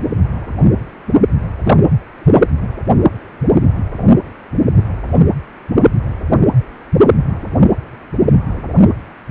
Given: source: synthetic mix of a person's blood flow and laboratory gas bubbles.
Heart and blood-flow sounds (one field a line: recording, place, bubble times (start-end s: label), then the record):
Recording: Doppler ultrasound of blood flow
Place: precordium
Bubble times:
1.63-1.77 s: bubbles
2.18-2.47 s: bubbles
From the record:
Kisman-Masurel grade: 212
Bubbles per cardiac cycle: several, 3 to 8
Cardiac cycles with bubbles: 1 to 10%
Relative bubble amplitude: moderate (0.250 to 0.450)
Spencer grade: 1 (occasional bubble signal discernible with the cardiac motion signal, with majority of cardiac periods free of bubbles)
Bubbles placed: anywhere in the cardiac cycle